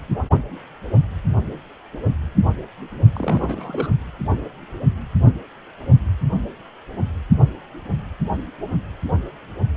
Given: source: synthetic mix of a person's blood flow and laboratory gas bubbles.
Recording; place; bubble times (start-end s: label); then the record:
Doppler ultrasound of blood flow; precordium
3.15-3.92 s: bubbles
From the record:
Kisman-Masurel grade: 211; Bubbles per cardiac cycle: several, 3 to 8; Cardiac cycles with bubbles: 1 to 10%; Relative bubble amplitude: barely perceptible (0.100 to 0.250); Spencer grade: 1 (occasional bubble signal discernible with the cardiac motion signal, with majority of cardiac periods free of bubbles); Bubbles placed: only in the low amplitude regions of the cardiac cycle